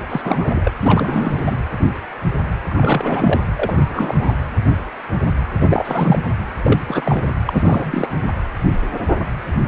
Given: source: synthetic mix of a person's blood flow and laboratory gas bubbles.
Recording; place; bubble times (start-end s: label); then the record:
Doppler ultrasound of blood flow; precordium
0.10-0.22 s: bubbles
0.24-0.72 s: bubbles
0.80-1.56 s: bubbles
2.69-3.43 s: bubbles
3.55-4.37 s: bubbles
5.60-5.66 s: bubbles
5.69-6.19 s: bubbles
6.63-6.81 s: bubbles
6.88-7.29 s: bubbles
7.47-8.08 s: bubbles
From the record:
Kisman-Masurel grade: 332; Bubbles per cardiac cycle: rolling drumbeat, 9 or more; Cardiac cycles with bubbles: 50 to 99%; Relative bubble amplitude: moderate (0.250 to 0.450); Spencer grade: 3 (all of the cardiac periods contain showers or single bubble signals, but not dominating or overriding the cardiac motion signals); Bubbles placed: anywhere in the cardiac cycle